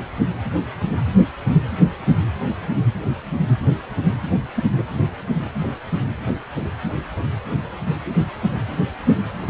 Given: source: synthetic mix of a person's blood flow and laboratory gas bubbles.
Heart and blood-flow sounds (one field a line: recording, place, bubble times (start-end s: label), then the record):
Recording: Doppler ultrasound of blood flow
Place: precordium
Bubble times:
4.56-4.64 s: bubbles
4.73-4.84 s: bubbles
From the record:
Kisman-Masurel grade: 111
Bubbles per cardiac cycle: 1 to 2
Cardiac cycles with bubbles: 1 to 10%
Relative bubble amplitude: barely perceptible (0.100 to 0.250)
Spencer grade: 1 (occasional bubble signal discernible with the cardiac motion signal, with majority of cardiac periods free of bubbles)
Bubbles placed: anywhere in the cardiac cycle